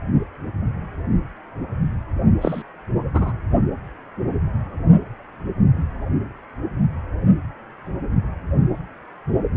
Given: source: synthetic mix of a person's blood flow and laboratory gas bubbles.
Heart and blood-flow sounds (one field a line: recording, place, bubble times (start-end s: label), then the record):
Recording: Doppler ultrasound of blood flow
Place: precordium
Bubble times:
2.41-2.63 s: bubbles
3.13-3.32 s: bubbles
From the record:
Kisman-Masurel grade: 122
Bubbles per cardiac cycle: 1 to 2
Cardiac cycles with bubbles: 10 to 50%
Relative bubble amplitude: moderate (0.250 to 0.450)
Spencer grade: 2 (many but less than half of the cardiac periods contain bubble signals, singularly or in groups)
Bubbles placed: only in the low amplitude regions of the cardiac cycle